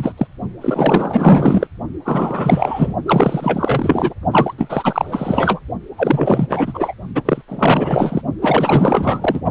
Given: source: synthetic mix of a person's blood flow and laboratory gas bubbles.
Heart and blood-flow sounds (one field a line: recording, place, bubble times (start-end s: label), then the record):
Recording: Doppler ultrasound of blood flow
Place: precordium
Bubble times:
0.00-0.12 s: bubbles
0.17-0.27 s: bubbles
0.61-1.67 s: bubbles
2.05-2.94 s: bubbles
3.05-4.14 s: bubbles
4.31-4.54 s: bubbles
4.58-5.60 s: bubbles
5.97-6.94 s: bubbles
7.15-7.22 s: bubbles
7.25-7.42 s: bubbles
7.48-8.21 s: bubbles
8.42-9.41 s: bubbles
From the record:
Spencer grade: 4 (maximum detectable bubble signal sounding continuously throughout systole and diastole of every cardiac period, and overriding the amplitude of the normal cardiac signals)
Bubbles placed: only in the low amplitude regions of the cardiac cycle